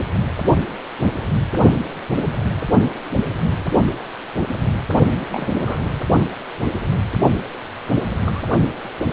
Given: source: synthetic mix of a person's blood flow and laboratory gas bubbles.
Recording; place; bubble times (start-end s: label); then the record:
Doppler ultrasound of blood flow; precordium
5.32-5.89 s: bubbles
8.25-8.43 s: bubbles
From the record:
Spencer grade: 2 (many but less than half of the cardiac periods contain bubble signals, singularly or in groups); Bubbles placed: only in the low amplitude regions of the cardiac cycle